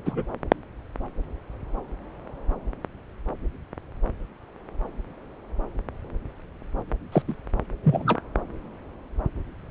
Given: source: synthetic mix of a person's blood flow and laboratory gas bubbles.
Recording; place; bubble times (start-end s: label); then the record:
Doppler ultrasound of blood flow; subclavian vein
0.05-0.26 s: bubbles
7.12-7.22 s: bubbles
7.28-7.35 s: bubbles
7.83-8.21 s: bubbles
From the record:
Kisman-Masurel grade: 122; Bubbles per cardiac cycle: 1 to 2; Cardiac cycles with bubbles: 10 to 50%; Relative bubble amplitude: moderate (0.250 to 0.450); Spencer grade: 2 (many but less than half of the cardiac periods contain bubble signals, singularly or in groups); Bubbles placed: anywhere in the cardiac cycle